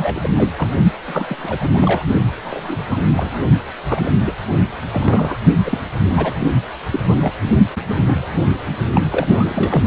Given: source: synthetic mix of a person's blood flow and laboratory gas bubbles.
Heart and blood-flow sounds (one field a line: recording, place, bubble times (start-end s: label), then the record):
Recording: Doppler ultrasound of blood flow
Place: precordium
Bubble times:
0.00-0.29 s: bubbles
0.37-0.50 s: bubbles
0.57-0.69 s: bubbles
1.07-1.57 s: bubbles
1.61-2.03 s: bubbles
2.44-2.77 s: bubbles
2.89-2.97 s: bubbles
3.16-3.47 s: bubbles
3.88-4.11 s: bubbles
4.27-4.33 s: bubbles
4.92-5.38 s: bubbles
5.66-5.78 s: bubbles
6.17-6.47 s: bubbles
6.92-7.00 s: bubbles
7.08-7.16 s: bubbles
7.21-7.33 s: bubbles
7.89-7.95 s: bubbles
8.01-8.28 s: bubbles
8.95-9.02 s: bubbles
9.11-9.27 s: bubbles
9.34-9.85 s: bubbles
From the record:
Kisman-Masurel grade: 242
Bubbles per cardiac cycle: several, 3 to 8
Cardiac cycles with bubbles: 100%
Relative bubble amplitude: moderate (0.250 to 0.450)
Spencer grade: 3 (all of the cardiac periods contain showers or single bubble signals, but not dominating or overriding the cardiac motion signals)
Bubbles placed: only in the low amplitude regions of the cardiac cycle